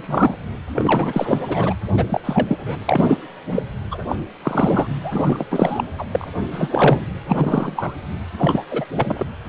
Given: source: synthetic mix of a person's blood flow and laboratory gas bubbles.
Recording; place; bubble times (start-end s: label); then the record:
Doppler ultrasound of blood flow; precordium
0.00-0.34 s: bubbles
0.76-1.38 s: bubbles
1.48-1.73 s: bubbles
1.97-2.04 s: bubbles
2.07-2.21 s: bubbles
2.24-2.79 s: bubbles
2.85-3.17 s: bubbles
3.51-3.64 s: bubbles
3.91-3.98 s: bubbles
4.08-4.16 s: bubbles
4.42-4.87 s: bubbles
5.03-5.84 s: bubbles
5.98-6.05 s: bubbles
6.12-6.28 s: bubbles
6.51-7.05 s: bubbles
7.28-7.96 s: bubbles
8.38-8.64 s: bubbles
8.71-8.85 s: bubbles
8.94-9.26 s: bubbles
From the record:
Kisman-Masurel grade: 343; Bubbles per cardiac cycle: rolling drumbeat, 9 or more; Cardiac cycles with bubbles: 100%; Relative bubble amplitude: loud (0.450 to 0.775); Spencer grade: 3 (all of the cardiac periods contain showers or single bubble signals, but not dominating or overriding the cardiac motion signals); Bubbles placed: anywhere in the cardiac cycle